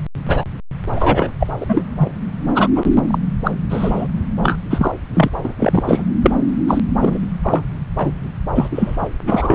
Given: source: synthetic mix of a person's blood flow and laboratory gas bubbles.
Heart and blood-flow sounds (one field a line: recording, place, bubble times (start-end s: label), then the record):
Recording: Doppler ultrasound of blood flow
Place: subclavian vein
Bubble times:
0.24-0.44 s: bubbles
0.95-1.32 s: bubbles
1.39-1.47 s: bubbles
1.60-1.84 s: bubbles
1.97-2.11 s: bubbles
2.49-2.51 s: bubbles
2.54-2.68 s: bubbles
2.75-2.91 s: bubbles
3.08-3.19 s: bubbles
3.44-3.51 s: bubbles
3.70-4.07 s: bubbles
4.43-4.56 s: bubbles
4.70-4.92 s: bubbles
5.14-5.30 s: bubbles
5.44-5.53 s: bubbles
5.60-6.04 s: bubbles
6.23-6.32 s: bubbles
6.68-6.81 s: bubbles
7.02-7.19 s: bubbles
7.43-7.62 s: bubbles
7.97-8.11 s: bubbles
8.55-8.68 s: bubbles
8.71-9.09 s: bubbles
9.27-9.55 s: bubbles
From the record:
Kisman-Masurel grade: 243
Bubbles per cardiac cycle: several, 3 to 8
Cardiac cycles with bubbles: 100%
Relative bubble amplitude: loud (0.450 to 0.775)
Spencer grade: 3 (all of the cardiac periods contain showers or single bubble signals, but not dominating or overriding the cardiac motion signals)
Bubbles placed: anywhere in the cardiac cycle